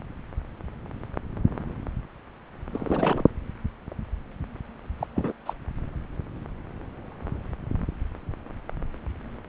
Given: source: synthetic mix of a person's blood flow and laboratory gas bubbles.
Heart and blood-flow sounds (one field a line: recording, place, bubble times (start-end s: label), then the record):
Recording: Doppler ultrasound of blood flow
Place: subclavian vein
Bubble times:
2.72-3.24 s: bubbles
4.99-5.07 s: bubbles
5.15-5.32 s: bubbles
5.46-5.53 s: bubbles
From the record:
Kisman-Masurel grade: 222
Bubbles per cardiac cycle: several, 3 to 8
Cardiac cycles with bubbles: 10 to 50%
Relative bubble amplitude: moderate (0.250 to 0.450)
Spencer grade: 2 (many but less than half of the cardiac periods contain bubble signals, singularly or in groups)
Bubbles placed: anywhere in the cardiac cycle